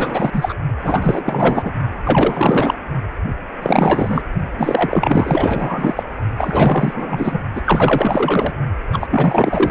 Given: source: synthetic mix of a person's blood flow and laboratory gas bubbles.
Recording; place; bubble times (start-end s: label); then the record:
Doppler ultrasound of blood flow; precordium
0.00-0.54 s: bubbles
0.81-1.71 s: bubbles
2.04-2.74 s: bubbles
3.62-4.23 s: bubbles
4.58-6.03 s: bubbles
6.38-7.41 s: bubbles
7.55-7.62 s: bubbles
7.65-8.52 s: bubbles
8.93-9.71 s: bubbles
From the record:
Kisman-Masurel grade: 444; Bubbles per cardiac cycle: continuous sound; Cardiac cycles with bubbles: 100%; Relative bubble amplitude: maximal (0.775 to 0.999); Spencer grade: 4 (maximum detectable bubble signal sounding continuously throughout systole and diastole of every cardiac period, and overriding the amplitude of the normal cardiac signals); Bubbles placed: only in the low amplitude regions of the cardiac cycle